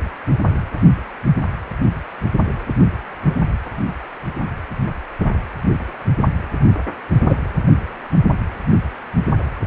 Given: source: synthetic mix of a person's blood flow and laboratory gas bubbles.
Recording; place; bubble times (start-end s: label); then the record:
Doppler ultrasound of blood flow; precordium
7.29-7.38 s: bubbles
From the record:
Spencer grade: 1 (occasional bubble signal discernible with the cardiac motion signal, with majority of cardiac periods free of bubbles); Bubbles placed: anywhere in the cardiac cycle